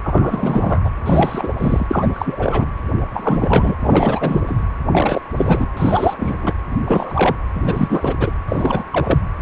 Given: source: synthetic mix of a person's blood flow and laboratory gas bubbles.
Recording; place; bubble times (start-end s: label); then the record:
Doppler ultrasound of blood flow; precordium
0.03-0.90 s: bubbles
1.06-1.53 s: bubbles
1.57-1.87 s: bubbles
1.90-2.70 s: bubbles
3.08-3.75 s: bubbles
3.79-4.40 s: bubbles
4.46-4.62 s: bubbles
4.92-5.21 s: bubbles
5.36-5.66 s: bubbles
5.76-6.53 s: bubbles
6.86-7.35 s: bubbles
7.53-8.14 s: bubbles
8.20-8.30 s: bubbles
8.47-8.83 s: bubbles
8.92-9.20 s: bubbles
From the record:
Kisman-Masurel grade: 342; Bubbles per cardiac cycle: rolling drumbeat, 9 or more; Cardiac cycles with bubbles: 100%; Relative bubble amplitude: moderate (0.250 to 0.450); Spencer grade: 3 (all of the cardiac periods contain showers or single bubble signals, but not dominating or overriding the cardiac motion signals); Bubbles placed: anywhere in the cardiac cycle